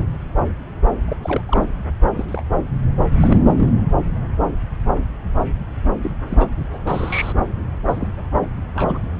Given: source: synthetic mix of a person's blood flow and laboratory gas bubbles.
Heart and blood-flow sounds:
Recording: Doppler ultrasound of blood flow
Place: subclavian vein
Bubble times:
1.07-1.17 s: bubbles
1.23-1.42 s: bubbles
1.46-1.66 s: bubbles
2.15-2.25 s: bubbles
2.28-2.42 s: bubbles
3.21-3.68 s: bubbles
6.03-6.11 s: bubbles
6.29-6.49 s: bubbles
6.72-6.79 s: bubbles
6.87-7.33 s: bubbles
7.88-8.08 s: bubbles
8.42-8.47 s: bubbles
8.75-9.01 s: bubbles
From the record:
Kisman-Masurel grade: 232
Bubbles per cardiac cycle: several, 3 to 8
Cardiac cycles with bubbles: 50 to 99%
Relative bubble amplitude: moderate (0.250 to 0.450)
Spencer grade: 3 (all of the cardiac periods contain showers or single bubble signals, but not dominating or overriding the cardiac motion signals)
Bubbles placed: anywhere in the cardiac cycle

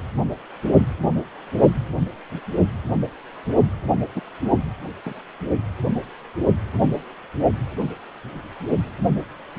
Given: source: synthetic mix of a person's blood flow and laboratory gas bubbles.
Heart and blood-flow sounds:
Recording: Doppler ultrasound of blood flow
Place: precordium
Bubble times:
1.99-2.07 s: bubbles
4.15-4.21 s: bubbles
5.05-5.14 s: bubbles
From the record:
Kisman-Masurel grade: 122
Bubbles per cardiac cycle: 1 to 2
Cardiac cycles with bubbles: 10 to 50%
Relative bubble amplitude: moderate (0.250 to 0.450)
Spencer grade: 2 (many but less than half of the cardiac periods contain bubble signals, singularly or in groups)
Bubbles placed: only in the low amplitude regions of the cardiac cycle

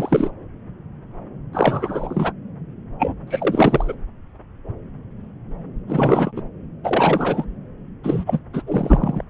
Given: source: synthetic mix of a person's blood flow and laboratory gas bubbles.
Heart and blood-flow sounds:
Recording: Doppler ultrasound of blood flow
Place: subclavian vein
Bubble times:
0.00-0.31 s: bubbles
1.53-2.32 s: bubbles
2.99-3.14 s: bubbles
3.27-3.94 s: bubbles
5.88-6.32 s: bubbles
6.35-6.42 s: bubbles
6.84-7.45 s: bubbles
8.04-8.39 s: bubbles
8.53-8.62 s: bubbles
8.67-9.23 s: bubbles
From the record:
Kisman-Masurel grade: 333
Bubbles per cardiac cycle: rolling drumbeat, 9 or more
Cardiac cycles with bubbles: 50 to 99%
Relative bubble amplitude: loud (0.450 to 0.775)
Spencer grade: 3 (all of the cardiac periods contain showers or single bubble signals, but not dominating or overriding the cardiac motion signals)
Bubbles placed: anywhere in the cardiac cycle

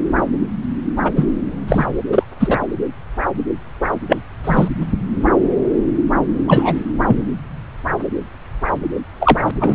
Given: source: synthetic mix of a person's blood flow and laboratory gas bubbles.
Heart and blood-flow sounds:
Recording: Doppler ultrasound of blood flow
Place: subclavian vein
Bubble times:
1.03-1.11 s: bubbles
1.16-1.26 s: bubbles
1.67-1.85 s: bubbles
2.12-2.23 s: bubbles
2.40-2.58 s: bubbles
4.08-4.19 s: bubbles
4.44-4.68 s: bubbles
6.47-6.77 s: bubbles
7.07-7.22 s: bubbles
9.20-9.39 s: bubbles
9.45-9.51 s: bubbles
9.59-9.75 s: bubbles
From the record:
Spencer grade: 3 (all of the cardiac periods contain showers or single bubble signals, but not dominating or overriding the cardiac motion signals)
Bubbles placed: anywhere in the cardiac cycle

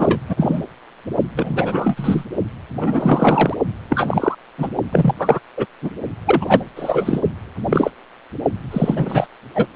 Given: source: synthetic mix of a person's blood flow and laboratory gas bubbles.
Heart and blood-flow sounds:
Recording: Doppler ultrasound of blood flow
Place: precordium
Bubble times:
0.00-0.20 s: bubbles
0.28-0.62 s: bubbles
1.36-2.25 s: bubbles
2.80-3.55 s: bubbles
3.89-4.35 s: bubbles
4.58-4.69 s: bubbles
4.92-5.15 s: bubbles
5.19-5.40 s: bubbles
5.57-5.66 s: bubbles
5.81-5.90 s: bubbles
6.26-6.69 s: bubbles
6.76-7.21 s: bubbles
7.70-7.90 s: bubbles
8.71-9.26 s: bubbles
9.54-9.66 s: bubbles
From the record:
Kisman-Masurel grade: 243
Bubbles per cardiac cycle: several, 3 to 8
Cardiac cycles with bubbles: 100%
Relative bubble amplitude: loud (0.450 to 0.775)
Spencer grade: 3 (all of the cardiac periods contain showers or single bubble signals, but not dominating or overriding the cardiac motion signals)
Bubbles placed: only in the low amplitude regions of the cardiac cycle

